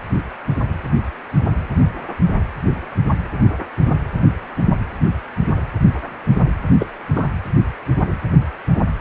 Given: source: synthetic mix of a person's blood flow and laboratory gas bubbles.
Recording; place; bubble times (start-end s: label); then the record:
Doppler ultrasound of blood flow; precordium
6.79-6.87 s: bubbles
7.14-7.27 s: bubbles
From the record:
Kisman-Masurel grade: 112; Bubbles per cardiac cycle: 1 to 2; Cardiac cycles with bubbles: 1 to 10%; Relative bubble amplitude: moderate (0.250 to 0.450); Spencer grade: 1 (occasional bubble signal discernible with the cardiac motion signal, with majority of cardiac periods free of bubbles); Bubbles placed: anywhere in the cardiac cycle